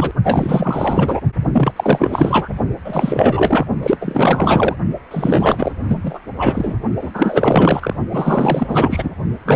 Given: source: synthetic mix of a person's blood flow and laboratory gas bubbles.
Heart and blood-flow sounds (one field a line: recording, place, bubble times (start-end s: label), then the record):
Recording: Doppler ultrasound of blood flow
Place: precordium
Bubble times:
0.00-0.11 s: bubbles
0.23-1.20 s: bubbles
1.53-1.72 s: bubbles
1.76-2.48 s: bubbles
2.85-3.65 s: bubbles
3.82-3.97 s: bubbles
4.00-4.76 s: bubbles
5.10-5.72 s: bubbles
5.88-6.19 s: bubbles
6.38-6.74 s: bubbles
7.01-7.10 s: bubbles
7.13-7.96 s: bubbles
8.12-9.11 s: bubbles
9.46-9.56 s: bubbles
From the record:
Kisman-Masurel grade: 444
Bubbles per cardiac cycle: continuous sound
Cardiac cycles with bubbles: 100%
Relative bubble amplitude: maximal (0.775 to 0.999)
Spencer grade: 4 (maximum detectable bubble signal sounding continuously throughout systole and diastole of every cardiac period, and overriding the amplitude of the normal cardiac signals)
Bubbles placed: only in the low amplitude regions of the cardiac cycle